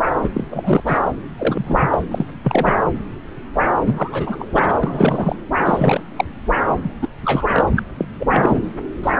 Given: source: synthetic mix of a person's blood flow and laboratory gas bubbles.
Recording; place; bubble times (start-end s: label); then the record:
Doppler ultrasound of blood flow; subclavian vein
0.24-0.30 s: bubbles
0.35-0.44 s: bubbles
0.51-0.83 s: bubbles
0.86-1.00 s: bubbles
1.38-1.99 s: bubbles
2.10-2.26 s: bubbles
2.43-2.77 s: bubbles
3.85-4.75 s: bubbles
4.81-5.36 s: bubbles
5.66-6.01 s: bubbles
6.16-6.25 s: bubbles
6.83-6.90 s: bubbles
7.02-7.08 s: bubbles
7.24-7.47 s: bubbles
7.53-7.67 s: bubbles
7.76-7.80 s: bubbles
7.98-8.05 s: bubbles
8.19-8.59 s: bubbles
9.03-9.11 s: bubbles
From the record:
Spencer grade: 3 (all of the cardiac periods contain showers or single bubble signals, but not dominating or overriding the cardiac motion signals); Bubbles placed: anywhere in the cardiac cycle